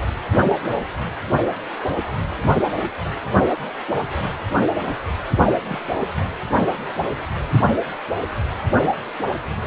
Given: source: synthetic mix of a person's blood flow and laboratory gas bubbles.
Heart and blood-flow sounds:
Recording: Doppler ultrasound of blood flow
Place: precordium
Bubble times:
5.65-5.79 s: bubbles
From the record:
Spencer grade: 1 (occasional bubble signal discernible with the cardiac motion signal, with majority of cardiac periods free of bubbles)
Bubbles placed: anywhere in the cardiac cycle

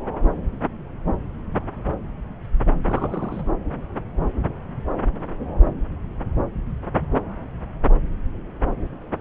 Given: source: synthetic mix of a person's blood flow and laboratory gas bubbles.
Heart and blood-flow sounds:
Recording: Doppler ultrasound of blood flow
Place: subclavian vein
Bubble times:
2.85-3.50 s: bubbles
From the record:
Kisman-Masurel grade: 211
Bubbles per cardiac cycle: several, 3 to 8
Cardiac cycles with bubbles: 1 to 10%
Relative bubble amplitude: barely perceptible (0.100 to 0.250)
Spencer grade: 1 (occasional bubble signal discernible with the cardiac motion signal, with majority of cardiac periods free of bubbles)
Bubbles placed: anywhere in the cardiac cycle

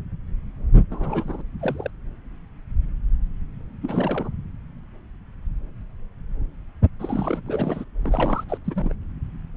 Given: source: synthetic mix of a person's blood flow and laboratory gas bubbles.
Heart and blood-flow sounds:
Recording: Doppler ultrasound of blood flow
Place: subclavian vein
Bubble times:
0.91-1.42 s: bubbles
1.59-1.91 s: bubbles
3.82-4.29 s: bubbles
7.00-7.42 s: bubbles
7.46-7.84 s: bubbles
8.02-8.44 s: bubbles
8.49-8.58 s: bubbles
8.64-8.94 s: bubbles
From the record:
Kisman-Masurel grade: 221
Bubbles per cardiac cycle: several, 3 to 8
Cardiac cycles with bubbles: 10 to 50%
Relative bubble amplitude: barely perceptible (0.100 to 0.250)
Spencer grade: 2 (many but less than half of the cardiac periods contain bubble signals, singularly or in groups)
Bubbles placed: anywhere in the cardiac cycle

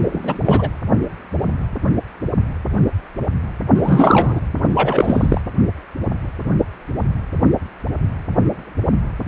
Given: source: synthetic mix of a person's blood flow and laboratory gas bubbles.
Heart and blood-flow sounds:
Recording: Doppler ultrasound of blood flow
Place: precordium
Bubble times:
0.00-0.38 s: bubbles
0.45-0.70 s: bubbles
3.75-4.41 s: bubbles
4.74-5.41 s: bubbles
From the record:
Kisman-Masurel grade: 223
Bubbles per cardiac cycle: several, 3 to 8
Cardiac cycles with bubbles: 10 to 50%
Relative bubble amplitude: loud (0.450 to 0.775)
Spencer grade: 2 (many but less than half of the cardiac periods contain bubble signals, singularly or in groups)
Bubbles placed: anywhere in the cardiac cycle

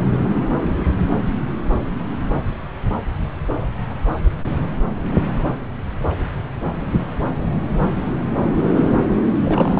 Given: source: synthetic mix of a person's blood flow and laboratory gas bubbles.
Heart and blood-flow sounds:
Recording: Doppler ultrasound of blood flow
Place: subclavian vein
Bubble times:
9.43-9.80 s: bubbles
From the record:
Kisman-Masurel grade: 212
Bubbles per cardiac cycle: several, 3 to 8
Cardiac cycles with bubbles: 1 to 10%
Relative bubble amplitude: moderate (0.250 to 0.450)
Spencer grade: 1 (occasional bubble signal discernible with the cardiac motion signal, with majority of cardiac periods free of bubbles)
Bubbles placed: anywhere in the cardiac cycle

